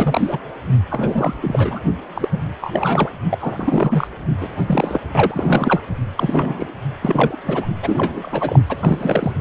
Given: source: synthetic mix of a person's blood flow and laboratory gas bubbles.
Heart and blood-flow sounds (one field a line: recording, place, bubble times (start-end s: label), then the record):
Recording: Doppler ultrasound of blood flow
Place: precordium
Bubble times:
0.00-0.40 s: bubbles
0.90-1.33 s: bubbles
1.41-1.80 s: bubbles
2.15-2.29 s: bubbles
2.31-2.42 s: bubbles
2.61-3.10 s: bubbles
3.29-4.07 s: bubbles
4.40-4.48 s: bubbles
4.66-5.01 s: bubbles
5.12-5.81 s: bubbles
6.15-6.74 s: bubbles
7.02-7.37 s: bubbles
7.45-7.66 s: bubbles
7.82-8.62 s: bubbles
8.68-9.32 s: bubbles
From the record:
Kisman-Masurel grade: 342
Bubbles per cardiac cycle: rolling drumbeat, 9 or more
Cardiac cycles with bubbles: 100%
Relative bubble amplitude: moderate (0.250 to 0.450)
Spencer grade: 3 (all of the cardiac periods contain showers or single bubble signals, but not dominating or overriding the cardiac motion signals)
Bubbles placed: anywhere in the cardiac cycle